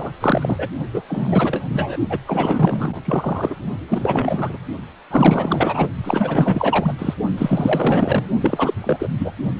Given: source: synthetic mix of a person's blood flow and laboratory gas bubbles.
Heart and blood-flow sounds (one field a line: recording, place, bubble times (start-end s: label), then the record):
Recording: Doppler ultrasound of blood flow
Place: precordium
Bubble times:
0.00-0.11 s: bubbles
0.21-0.69 s: bubbles
0.94-1.02 s: bubbles
1.08-1.97 s: bubbles
2.10-2.19 s: bubbles
2.27-3.03 s: bubbles
3.05-3.57 s: bubbles
3.88-4.58 s: bubbles
5.10-5.89 s: bubbles
6.04-6.94 s: bubbles
6.98-7.14 s: bubbles
7.37-8.28 s: bubbles
8.40-8.74 s: bubbles
8.83-9.08 s: bubbles
9.18-9.32 s: bubbles
From the record:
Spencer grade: 4 (maximum detectable bubble signal sounding continuously throughout systole and diastole of every cardiac period, and overriding the amplitude of the normal cardiac signals)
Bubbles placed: only in the low amplitude regions of the cardiac cycle